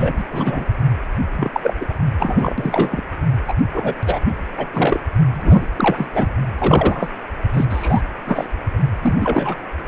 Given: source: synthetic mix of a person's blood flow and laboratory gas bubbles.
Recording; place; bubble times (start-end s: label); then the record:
Doppler ultrasound of blood flow; precordium
0.00-0.14 s: bubbles
0.16-0.24 s: bubbles
0.30-0.66 s: bubbles
1.36-1.74 s: bubbles
1.80-1.86 s: bubbles
1.89-1.92 s: bubbles
2.19-3.03 s: bubbles
3.48-3.54 s: bubbles
3.72-3.95 s: bubbles
4.04-4.20 s: bubbles
4.58-4.67 s: bubbles
4.73-5.00 s: bubbles
5.33-5.68 s: bubbles
5.76-6.09 s: bubbles
6.12-6.27 s: bubbles
6.58-7.10 s: bubbles
7.50-7.65 s: bubbles
7.69-8.02 s: bubbles
8.23-8.47 s: bubbles
9.02-9.55 s: bubbles
From the record:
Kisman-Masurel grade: 243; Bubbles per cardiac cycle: several, 3 to 8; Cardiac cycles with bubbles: 100%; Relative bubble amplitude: loud (0.450 to 0.775); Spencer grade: 3 (all of the cardiac periods contain showers or single bubble signals, but not dominating or overriding the cardiac motion signals); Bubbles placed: anywhere in the cardiac cycle